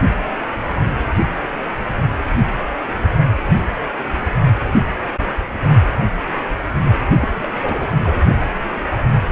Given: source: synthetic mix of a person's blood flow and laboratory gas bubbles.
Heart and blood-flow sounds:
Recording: Doppler ultrasound of blood flow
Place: precordium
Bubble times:
7.21-7.29 s: bubbles
7.37-7.47 s: bubbles
7.62-7.96 s: bubbles
8.03-8.20 s: bubbles
From the record:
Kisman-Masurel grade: 221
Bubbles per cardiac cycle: several, 3 to 8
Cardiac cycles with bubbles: 10 to 50%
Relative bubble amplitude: barely perceptible (0.100 to 0.250)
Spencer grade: 2 (many but less than half of the cardiac periods contain bubble signals, singularly or in groups)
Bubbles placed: only in the low amplitude regions of the cardiac cycle

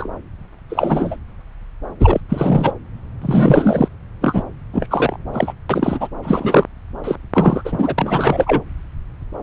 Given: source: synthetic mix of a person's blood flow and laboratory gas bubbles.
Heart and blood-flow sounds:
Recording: Doppler ultrasound of blood flow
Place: subclavian vein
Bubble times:
0.00-0.10 s: bubbles
0.69-1.17 s: bubbles
2.00-2.21 s: bubbles
2.29-2.71 s: bubbles
3.21-3.88 s: bubbles
4.21-4.42 s: bubbles
4.72-4.87 s: bubbles
4.91-5.16 s: bubbles
5.33-5.53 s: bubbles
5.69-6.08 s: bubbles
6.22-6.66 s: bubbles
7.04-7.16 s: bubbles
7.34-7.62 s: bubbles
7.64-7.95 s: bubbles
7.98-8.62 s: bubbles
From the record:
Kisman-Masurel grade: 333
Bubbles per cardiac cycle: rolling drumbeat, 9 or more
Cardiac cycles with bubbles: 50 to 99%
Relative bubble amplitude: loud (0.450 to 0.775)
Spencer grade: 3 (all of the cardiac periods contain showers or single bubble signals, but not dominating or overriding the cardiac motion signals)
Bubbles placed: anywhere in the cardiac cycle

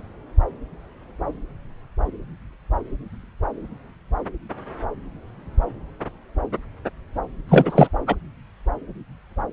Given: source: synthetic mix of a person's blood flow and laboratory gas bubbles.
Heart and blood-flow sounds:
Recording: Doppler ultrasound of blood flow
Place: subclavian vein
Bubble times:
7.49-7.89 s: bubbles
8.07-8.15 s: bubbles
From the record:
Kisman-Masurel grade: 213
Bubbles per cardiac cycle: several, 3 to 8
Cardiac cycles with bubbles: 1 to 10%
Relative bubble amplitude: loud (0.450 to 0.775)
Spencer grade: 1 (occasional bubble signal discernible with the cardiac motion signal, with majority of cardiac periods free of bubbles)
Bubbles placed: anywhere in the cardiac cycle

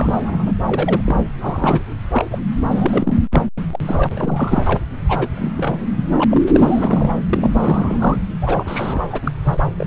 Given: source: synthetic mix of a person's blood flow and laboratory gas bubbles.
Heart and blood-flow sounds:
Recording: Doppler ultrasound of blood flow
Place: subclavian vein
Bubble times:
0.00-0.54 s: bubbles
0.66-1.01 s: bubbles
1.04-1.19 s: bubbles
1.40-1.82 s: bubbles
2.12-2.25 s: bubbles
2.31-2.39 s: bubbles
2.70-3.19 s: bubbles
3.32-3.42 s: bubbles
3.73-3.79 s: bubbles
3.85-4.63 s: bubbles
4.67-4.79 s: bubbles
5.08-5.29 s: bubbles
5.34-5.51 s: bubbles
5.56-5.86 s: bubbles
5.97-6.03 s: bubbles
6.10-6.25 s: bubbles
6.30-6.42 s: bubbles
6.51-7.13 s: bubbles
7.29-8.17 s: bubbles
8.41-9.03 s: bubbles
9.10-9.20 s: bubbles
9.23-9.31 s: bubbles
9.44-9.57 s: bubbles
9.76-9.86 s: bubbles
From the record:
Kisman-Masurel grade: 332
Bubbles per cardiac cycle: rolling drumbeat, 9 or more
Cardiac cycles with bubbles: 50 to 99%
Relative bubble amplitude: moderate (0.250 to 0.450)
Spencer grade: 3 (all of the cardiac periods contain showers or single bubble signals, but not dominating or overriding the cardiac motion signals)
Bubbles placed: anywhere in the cardiac cycle

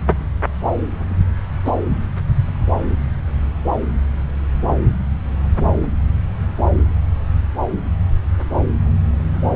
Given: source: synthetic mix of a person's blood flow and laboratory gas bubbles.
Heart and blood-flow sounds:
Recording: Doppler ultrasound of blood flow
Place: subclavian vein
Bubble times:
1.65-1.73 s: bubbles
From the record:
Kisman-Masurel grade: 113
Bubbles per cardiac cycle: 1 to 2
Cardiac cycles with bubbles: 1 to 10%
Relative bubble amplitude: loud (0.450 to 0.775)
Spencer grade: 1 (occasional bubble signal discernible with the cardiac motion signal, with majority of cardiac periods free of bubbles)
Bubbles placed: anywhere in the cardiac cycle

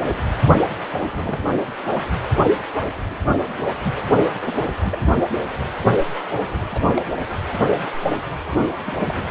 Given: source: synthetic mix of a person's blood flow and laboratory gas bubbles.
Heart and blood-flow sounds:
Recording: Doppler ultrasound of blood flow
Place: precordium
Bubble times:
0.99-1.40 s: bubbles
1.90-1.96 s: bubbles
3.84-3.94 s: bubbles
4.05-4.18 s: bubbles
4.40-4.71 s: bubbles
4.82-4.98 s: bubbles
6.51-7.10 s: bubbles
8.52-8.70 s: bubbles
8.86-9.29 s: bubbles
From the record:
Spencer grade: 2 (many but less than half of the cardiac periods contain bubble signals, singularly or in groups)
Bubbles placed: anywhere in the cardiac cycle

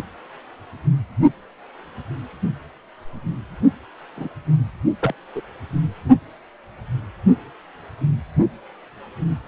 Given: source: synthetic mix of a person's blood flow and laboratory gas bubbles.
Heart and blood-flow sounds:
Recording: Doppler ultrasound of blood flow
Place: precordium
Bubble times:
4.17-4.29 s: bubbles
5.00-5.13 s: bubbles
5.35-5.41 s: bubbles
From the record:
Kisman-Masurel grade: 122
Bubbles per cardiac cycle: 1 to 2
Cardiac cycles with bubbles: 10 to 50%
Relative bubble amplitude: moderate (0.250 to 0.450)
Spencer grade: 2 (many but less than half of the cardiac periods contain bubble signals, singularly or in groups)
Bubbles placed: only in the low amplitude regions of the cardiac cycle

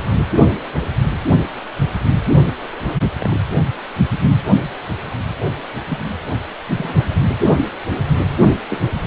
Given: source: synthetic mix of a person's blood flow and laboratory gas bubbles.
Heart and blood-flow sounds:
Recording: Doppler ultrasound of blood flow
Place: precordium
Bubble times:
3.20-3.40 s: bubbles
5.88-5.98 s: bubbles
6.78-6.95 s: bubbles
8.69-8.81 s: bubbles
From the record:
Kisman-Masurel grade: 122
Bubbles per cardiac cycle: 1 to 2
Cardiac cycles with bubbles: 10 to 50%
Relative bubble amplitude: moderate (0.250 to 0.450)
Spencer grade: 2 (many but less than half of the cardiac periods contain bubble signals, singularly or in groups)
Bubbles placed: only in the low amplitude regions of the cardiac cycle

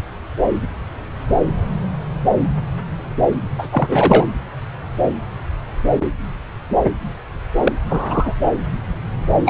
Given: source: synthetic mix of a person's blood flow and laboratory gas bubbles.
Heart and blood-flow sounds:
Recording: Doppler ultrasound of blood flow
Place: subclavian vein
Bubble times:
3.58-3.68 s: bubbles
3.71-4.26 s: bubbles
7.63-7.72 s: bubbles
7.89-8.34 s: bubbles
9.45-9.50 s: bubbles
From the record:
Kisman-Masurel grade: 223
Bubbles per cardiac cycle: several, 3 to 8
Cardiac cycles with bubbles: 10 to 50%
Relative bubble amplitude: loud (0.450 to 0.775)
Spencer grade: 2 (many but less than half of the cardiac periods contain bubble signals, singularly or in groups)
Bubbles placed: anywhere in the cardiac cycle

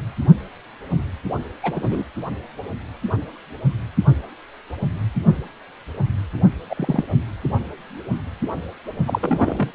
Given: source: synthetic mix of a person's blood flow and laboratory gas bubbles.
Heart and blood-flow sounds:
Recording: Doppler ultrasound of blood flow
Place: precordium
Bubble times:
1.63-2.04 s: bubbles
6.70-7.03 s: bubbles
9.06-9.71 s: bubbles
From the record:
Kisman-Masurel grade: 122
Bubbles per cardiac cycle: 1 to 2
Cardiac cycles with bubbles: 10 to 50%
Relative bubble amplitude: moderate (0.250 to 0.450)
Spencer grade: 2 (many but less than half of the cardiac periods contain bubble signals, singularly or in groups)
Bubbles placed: anywhere in the cardiac cycle

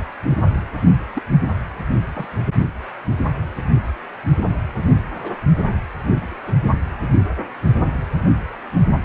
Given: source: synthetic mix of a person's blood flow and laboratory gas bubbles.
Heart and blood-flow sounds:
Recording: Doppler ultrasound of blood flow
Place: precordium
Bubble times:
0.29-0.37 s: bubbles
1.14-1.23 s: bubbles
2.14-2.27 s: bubbles
5.16-5.33 s: bubbles
6.46-6.56 s: bubbles
From the record:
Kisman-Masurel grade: 121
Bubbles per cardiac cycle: 1 to 2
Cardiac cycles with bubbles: 10 to 50%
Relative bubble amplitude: barely perceptible (0.100 to 0.250)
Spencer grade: 2 (many but less than half of the cardiac periods contain bubble signals, singularly or in groups)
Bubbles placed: only in the low amplitude regions of the cardiac cycle

